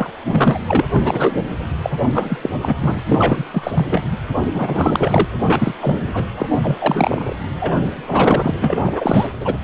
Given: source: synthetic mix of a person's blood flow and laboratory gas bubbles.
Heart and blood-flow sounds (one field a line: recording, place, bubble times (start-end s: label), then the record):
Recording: Doppler ultrasound of blood flow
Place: precordium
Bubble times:
0.00-0.10 s: bubbles
0.32-0.59 s: bubbles
0.68-0.84 s: bubbles
0.92-1.42 s: bubbles
1.82-1.90 s: bubbles
2.14-2.38 s: bubbles
2.42-2.49 s: bubbles
2.61-2.75 s: bubbles
2.81-2.99 s: bubbles
3.06-3.45 s: bubbles
3.52-3.71 s: bubbles
3.73-4.04 s: bubbles
4.53-5.25 s: bubbles
5.46-5.74 s: bubbles
5.81-6.25 s: bubbles
6.37-6.46 s: bubbles
6.52-6.58 s: bubbles
6.63-7.36 s: bubbles
7.60-7.78 s: bubbles
7.87-8.54 s: bubbles
8.61-9.28 s: bubbles
9.40-9.54 s: bubbles
From the record:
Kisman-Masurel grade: 343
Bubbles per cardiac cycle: rolling drumbeat, 9 or more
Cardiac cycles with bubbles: 100%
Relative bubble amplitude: loud (0.450 to 0.775)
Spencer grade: 3 (all of the cardiac periods contain showers or single bubble signals, but not dominating or overriding the cardiac motion signals)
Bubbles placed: anywhere in the cardiac cycle